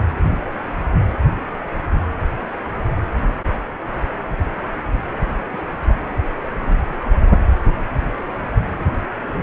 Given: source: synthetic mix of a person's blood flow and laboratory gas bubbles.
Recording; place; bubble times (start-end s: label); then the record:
Doppler ultrasound of blood flow; precordium
5.38-5.62 s: bubbles
6.67-6.79 s: bubbles
7.02-7.38 s: bubbles
From the record:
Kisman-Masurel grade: 121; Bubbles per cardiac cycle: 1 to 2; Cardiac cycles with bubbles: 10 to 50%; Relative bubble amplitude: barely perceptible (0.100 to 0.250); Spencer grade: 2 (many but less than half of the cardiac periods contain bubble signals, singularly or in groups); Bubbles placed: anywhere in the cardiac cycle